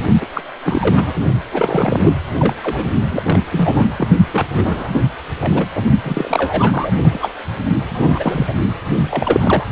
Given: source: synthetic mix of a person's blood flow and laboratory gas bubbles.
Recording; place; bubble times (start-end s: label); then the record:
Doppler ultrasound of blood flow; precordium
0.21-0.26 s: bubbles
0.34-0.41 s: bubbles
0.65-1.22 s: bubbles
1.52-2.16 s: bubbles
2.38-2.54 s: bubbles
2.62-2.86 s: bubbles
3.10-3.43 s: bubbles
3.52-3.87 s: bubbles
3.97-4.08 s: bubbles
4.31-4.46 s: bubbles
4.53-4.89 s: bubbles
4.92-5.01 s: bubbles
5.40-5.67 s: bubbles
5.75-5.81 s: bubbles
6.02-6.92 s: bubbles
7.02-7.29 s: bubbles
7.89-8.54 s: bubbles
8.93-9.65 s: bubbles
From the record:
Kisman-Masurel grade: 342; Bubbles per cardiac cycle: rolling drumbeat, 9 or more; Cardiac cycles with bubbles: 100%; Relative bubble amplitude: moderate (0.250 to 0.450); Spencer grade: 3 (all of the cardiac periods contain showers or single bubble signals, but not dominating or overriding the cardiac motion signals); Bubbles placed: only in the low amplitude regions of the cardiac cycle